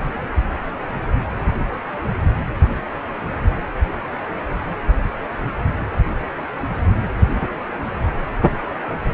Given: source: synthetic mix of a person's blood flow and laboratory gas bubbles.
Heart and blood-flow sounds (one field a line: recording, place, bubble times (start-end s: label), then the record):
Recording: Doppler ultrasound of blood flow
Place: precordium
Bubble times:
3.89-3.98 s: bubbles
From the record:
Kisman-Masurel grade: 111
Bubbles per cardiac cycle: 1 to 2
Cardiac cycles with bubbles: 1 to 10%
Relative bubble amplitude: barely perceptible (0.100 to 0.250)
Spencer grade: 1 (occasional bubble signal discernible with the cardiac motion signal, with majority of cardiac periods free of bubbles)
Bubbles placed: anywhere in the cardiac cycle